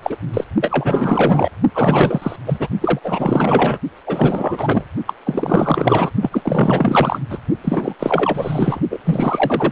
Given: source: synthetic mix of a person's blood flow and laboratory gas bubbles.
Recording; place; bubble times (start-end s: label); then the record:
Doppler ultrasound of blood flow; precordium
0.02-0.17 s: bubbles
0.33-0.45 s: bubbles
0.61-1.50 s: bubbles
1.74-2.36 s: bubbles
2.46-2.67 s: bubbles
2.81-2.99 s: bubbles
3.03-3.78 s: bubbles
4.06-4.85 s: bubbles
5.07-5.13 s: bubbles
5.25-6.12 s: bubbles
6.22-7.21 s: bubbles
7.30-7.39 s: bubbles
7.64-7.94 s: bubbles
7.99-8.80 s: bubbles
8.90-8.98 s: bubbles
9.04-9.72 s: bubbles
From the record:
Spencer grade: 4 (maximum detectable bubble signal sounding continuously throughout systole and diastole of every cardiac period, and overriding the amplitude of the normal cardiac signals); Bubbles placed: only in the low amplitude regions of the cardiac cycle